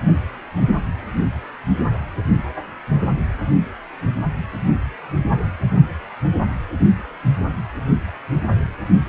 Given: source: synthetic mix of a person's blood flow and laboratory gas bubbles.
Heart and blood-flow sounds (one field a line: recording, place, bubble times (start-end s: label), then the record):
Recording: Doppler ultrasound of blood flow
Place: precordium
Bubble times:
5.76-5.81 s: bubbles
From the record:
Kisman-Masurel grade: 111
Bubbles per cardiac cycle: 1 to 2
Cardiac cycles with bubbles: 1 to 10%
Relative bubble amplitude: barely perceptible (0.100 to 0.250)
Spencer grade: 1 (occasional bubble signal discernible with the cardiac motion signal, with majority of cardiac periods free of bubbles)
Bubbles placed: anywhere in the cardiac cycle